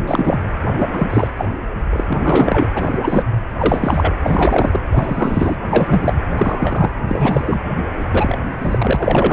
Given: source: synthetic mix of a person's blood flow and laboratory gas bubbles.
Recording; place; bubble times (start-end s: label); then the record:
Doppler ultrasound of blood flow; precordium
0.05-0.39 s: bubbles
0.77-1.27 s: bubbles
1.37-1.46 s: bubbles
1.93-2.70 s: bubbles
2.75-2.99 s: bubbles
3.02-3.24 s: bubbles
3.58-4.13 s: bubbles
4.24-4.80 s: bubbles
4.91-5.55 s: bubbles
5.71-6.13 s: bubbles
6.37-6.90 s: bubbles
7.07-7.61 s: bubbles
8.11-8.38 s: bubbles
8.61-9.33 s: bubbles
From the record:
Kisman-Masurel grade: 343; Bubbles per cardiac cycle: rolling drumbeat, 9 or more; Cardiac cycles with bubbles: 100%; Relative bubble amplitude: loud (0.450 to 0.775); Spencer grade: 3 (all of the cardiac periods contain showers or single bubble signals, but not dominating or overriding the cardiac motion signals); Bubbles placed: anywhere in the cardiac cycle